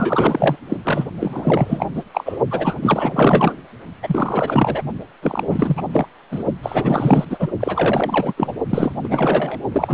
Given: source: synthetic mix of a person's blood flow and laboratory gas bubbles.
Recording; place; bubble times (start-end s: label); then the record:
Doppler ultrasound of blood flow; precordium
0.00-0.59 s: bubbles
0.69-0.79 s: bubbles
0.84-1.04 s: bubbles
1.20-1.86 s: bubbles
1.96-2.03 s: bubbles
2.14-2.38 s: bubbles
2.50-2.78 s: bubbles
2.81-3.56 s: bubbles
4.03-4.83 s: bubbles
5.22-5.44 s: bubbles
5.48-5.83 s: bubbles
5.92-6.06 s: bubbles
6.31-6.43 s: bubbles
6.62-7.25 s: bubbles
7.29-7.51 s: bubbles
7.60-8.33 s: bubbles
8.37-8.54 s: bubbles
8.70-8.93 s: bubbles
9.03-9.59 s: bubbles
9.72-9.94 s: bubbles
From the record:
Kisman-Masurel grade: 444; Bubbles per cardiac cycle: continuous sound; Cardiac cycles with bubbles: 100%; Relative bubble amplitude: maximal (0.775 to 0.999); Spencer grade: 4 (maximum detectable bubble signal sounding continuously throughout systole and diastole of every cardiac period, and overriding the amplitude of the normal cardiac signals); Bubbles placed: only in the low amplitude regions of the cardiac cycle